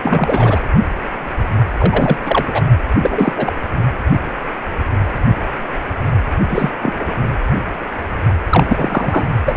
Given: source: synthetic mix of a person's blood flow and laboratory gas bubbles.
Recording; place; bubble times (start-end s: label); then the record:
Doppler ultrasound of blood flow; precordium
0.03-0.60 s: bubbles
1.78-2.17 s: bubbles
2.25-2.61 s: bubbles
2.98-3.33 s: bubbles
3.37-3.52 s: bubbles
6.47-6.70 s: bubbles
6.81-7.13 s: bubbles
8.49-9.24 s: bubbles
9.46-9.55 s: bubbles
From the record:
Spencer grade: 2 (many but less than half of the cardiac periods contain bubble signals, singularly or in groups); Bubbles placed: anywhere in the cardiac cycle